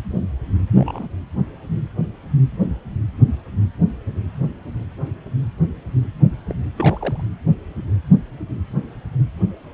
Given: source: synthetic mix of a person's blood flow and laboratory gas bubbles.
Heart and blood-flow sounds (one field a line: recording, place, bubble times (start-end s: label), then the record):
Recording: Doppler ultrasound of blood flow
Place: precordium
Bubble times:
0.76-1.08 s: bubbles
6.49-6.54 s: bubbles
6.76-7.24 s: bubbles
From the record:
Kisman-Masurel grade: 121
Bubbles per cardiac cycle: 1 to 2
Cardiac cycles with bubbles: 10 to 50%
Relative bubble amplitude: barely perceptible (0.100 to 0.250)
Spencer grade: 2 (many but less than half of the cardiac periods contain bubble signals, singularly or in groups)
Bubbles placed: anywhere in the cardiac cycle